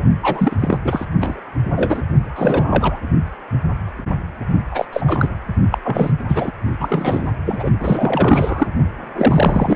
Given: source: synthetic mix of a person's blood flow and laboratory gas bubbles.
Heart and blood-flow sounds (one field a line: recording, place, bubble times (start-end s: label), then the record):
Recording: Doppler ultrasound of blood flow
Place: precordium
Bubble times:
0.00-0.03 s: bubbles
0.22-0.56 s: bubbles
0.60-0.78 s: bubbles
0.84-1.06 s: bubbles
1.21-1.40 s: bubbles
1.76-2.02 s: bubbles
2.35-3.02 s: bubbles
4.71-4.85 s: bubbles
4.92-5.29 s: bubbles
5.71-5.78 s: bubbles
5.84-6.11 s: bubbles
6.28-6.51 s: bubbles
6.79-7.31 s: bubbles
7.45-7.70 s: bubbles
7.79-8.67 s: bubbles
9.15-9.76 s: bubbles
From the record:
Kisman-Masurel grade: 333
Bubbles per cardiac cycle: rolling drumbeat, 9 or more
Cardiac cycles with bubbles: 50 to 99%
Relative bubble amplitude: loud (0.450 to 0.775)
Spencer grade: 3 (all of the cardiac periods contain showers or single bubble signals, but not dominating or overriding the cardiac motion signals)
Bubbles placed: only in the low amplitude regions of the cardiac cycle